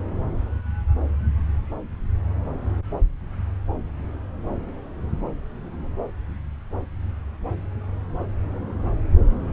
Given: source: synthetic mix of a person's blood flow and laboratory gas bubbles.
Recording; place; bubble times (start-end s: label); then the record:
Doppler ultrasound of blood flow; subclavian vein
no bubbles
From the record:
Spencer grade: 0 (complete lack of bubble signals)